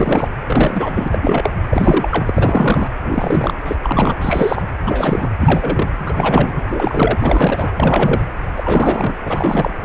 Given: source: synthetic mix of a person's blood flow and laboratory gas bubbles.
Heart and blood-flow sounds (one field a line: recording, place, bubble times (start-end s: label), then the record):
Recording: Doppler ultrasound of blood flow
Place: precordium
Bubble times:
0.00-0.28 s: bubbles
0.46-1.08 s: bubbles
1.12-1.20 s: bubbles
1.22-1.54 s: bubbles
1.70-2.93 s: bubbles
3.02-3.55 s: bubbles
3.66-3.76 s: bubbles
3.83-4.16 s: bubbles
4.21-4.63 s: bubbles
4.84-5.29 s: bubbles
5.40-5.88 s: bubbles
6.06-6.62 s: bubbles
6.68-7.70 s: bubbles
7.77-8.21 s: bubbles
8.56-9.16 s: bubbles
9.25-9.75 s: bubbles
From the record:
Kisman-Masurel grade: 343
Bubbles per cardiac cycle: rolling drumbeat, 9 or more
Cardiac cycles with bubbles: 100%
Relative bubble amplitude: loud (0.450 to 0.775)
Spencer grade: 3 (all of the cardiac periods contain showers or single bubble signals, but not dominating or overriding the cardiac motion signals)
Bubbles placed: anywhere in the cardiac cycle